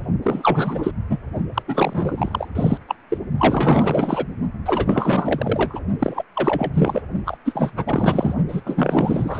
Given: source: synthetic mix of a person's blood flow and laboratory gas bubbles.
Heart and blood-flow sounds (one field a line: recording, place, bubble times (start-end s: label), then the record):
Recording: Doppler ultrasound of blood flow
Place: precordium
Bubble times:
0.22-0.91 s: bubbles
1.09-1.18 s: bubbles
1.54-1.62 s: bubbles
1.68-2.48 s: bubbles
2.55-2.77 s: bubbles
2.88-2.95 s: bubbles
3.10-3.18 s: bubbles
3.38-4.26 s: bubbles
4.65-5.80 s: bubbles
5.99-6.23 s: bubbles
6.34-7.02 s: bubbles
7.25-7.38 s: bubbles
7.44-7.72 s: bubbles
7.76-8.35 s: bubbles
8.48-8.61 s: bubbles
8.65-9.40 s: bubbles
From the record:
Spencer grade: 4 (maximum detectable bubble signal sounding continuously throughout systole and diastole of every cardiac period, and overriding the amplitude of the normal cardiac signals)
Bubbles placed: only in the low amplitude regions of the cardiac cycle